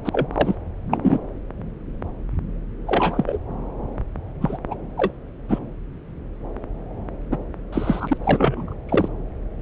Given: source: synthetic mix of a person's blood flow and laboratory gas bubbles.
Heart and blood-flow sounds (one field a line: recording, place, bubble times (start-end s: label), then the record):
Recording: Doppler ultrasound of blood flow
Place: subclavian vein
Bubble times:
0.04-0.09 s: bubbles
0.12-0.28 s: bubbles
0.33-0.55 s: bubbles
0.91-0.97 s: bubbles
1.02-1.19 s: bubbles
2.87-3.39 s: bubbles
4.41-4.58 s: bubbles
4.71-4.75 s: bubbles
4.97-5.12 s: bubbles
5.48-5.58 s: bubbles
7.31-7.37 s: bubbles
7.72-8.18 s: bubbles
8.24-8.74 s: bubbles
8.88-9.09 s: bubbles
From the record:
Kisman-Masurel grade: 232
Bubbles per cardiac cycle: several, 3 to 8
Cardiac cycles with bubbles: 50 to 99%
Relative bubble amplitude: moderate (0.250 to 0.450)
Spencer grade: 3 (all of the cardiac periods contain showers or single bubble signals, but not dominating or overriding the cardiac motion signals)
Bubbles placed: anywhere in the cardiac cycle